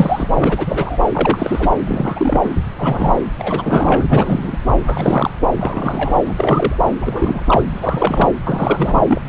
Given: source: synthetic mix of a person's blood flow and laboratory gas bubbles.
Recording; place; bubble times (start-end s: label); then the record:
Doppler ultrasound of blood flow; subclavian vein
0.00-0.28 s: bubbles
0.36-0.98 s: bubbles
1.11-1.68 s: bubbles
1.86-2.40 s: bubbles
2.44-2.54 s: bubbles
2.77-3.21 s: bubbles
3.39-4.04 s: bubbles
4.10-4.57 s: bubbles
4.73-5.30 s: bubbles
5.57-6.19 s: bubbles
6.25-6.75 s: bubbles
7.00-8.29 s: bubbles
8.44-9.21 s: bubbles
From the record:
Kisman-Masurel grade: 343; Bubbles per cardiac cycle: rolling drumbeat, 9 or more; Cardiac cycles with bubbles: 100%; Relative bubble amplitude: loud (0.450 to 0.775); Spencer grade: 3 (all of the cardiac periods contain showers or single bubble signals, but not dominating or overriding the cardiac motion signals); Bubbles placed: anywhere in the cardiac cycle